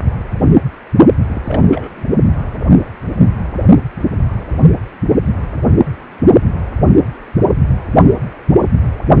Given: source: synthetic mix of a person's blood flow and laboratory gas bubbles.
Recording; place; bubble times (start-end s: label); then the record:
Doppler ultrasound of blood flow; precordium
1.34-2.11 s: bubbles
From the record:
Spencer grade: 1 (occasional bubble signal discernible with the cardiac motion signal, with majority of cardiac periods free of bubbles); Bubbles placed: only in the low amplitude regions of the cardiac cycle